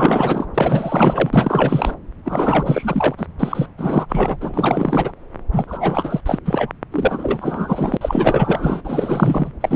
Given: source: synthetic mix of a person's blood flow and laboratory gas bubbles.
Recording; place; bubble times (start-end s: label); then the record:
Doppler ultrasound of blood flow; subclavian vein
0.00-0.46 s: bubbles
0.54-1.30 s: bubbles
1.33-1.95 s: bubbles
2.25-3.14 s: bubbles
3.17-3.27 s: bubbles
3.39-3.66 s: bubbles
3.77-4.06 s: bubbles
4.08-4.37 s: bubbles
4.41-5.13 s: bubbles
5.52-6.21 s: bubbles
6.25-6.39 s: bubbles
6.45-6.71 s: bubbles
6.92-7.97 s: bubbles
8.01-9.53 s: bubbles
9.61-9.76 s: bubbles
From the record:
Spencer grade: 4 (maximum detectable bubble signal sounding continuously throughout systole and diastole of every cardiac period, and overriding the amplitude of the normal cardiac signals); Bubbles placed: anywhere in the cardiac cycle